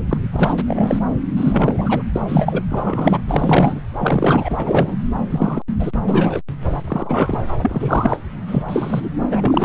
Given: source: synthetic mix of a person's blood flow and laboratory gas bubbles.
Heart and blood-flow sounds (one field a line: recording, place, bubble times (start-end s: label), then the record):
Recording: Doppler ultrasound of blood flow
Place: subclavian vein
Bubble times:
0.09-0.18 s: bubbles
0.32-0.57 s: bubbles
0.67-0.99 s: bubbles
1.36-2.02 s: bubbles
2.15-2.23 s: bubbles
2.28-2.62 s: bubbles
2.69-3.18 s: bubbles
3.27-3.80 s: bubbles
3.97-4.96 s: bubbles
5.30-5.62 s: bubbles
5.79-5.92 s: bubbles
6.08-6.40 s: bubbles
6.87-7.39 s: bubbles
7.62-8.17 s: bubbles
8.47-8.63 s: bubbles
8.68-9.08 s: bubbles
9.31-9.64 s: bubbles
From the record:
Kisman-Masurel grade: 243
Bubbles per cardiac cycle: several, 3 to 8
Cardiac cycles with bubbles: 100%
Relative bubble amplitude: loud (0.450 to 0.775)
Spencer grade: 3 (all of the cardiac periods contain showers or single bubble signals, but not dominating or overriding the cardiac motion signals)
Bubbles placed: anywhere in the cardiac cycle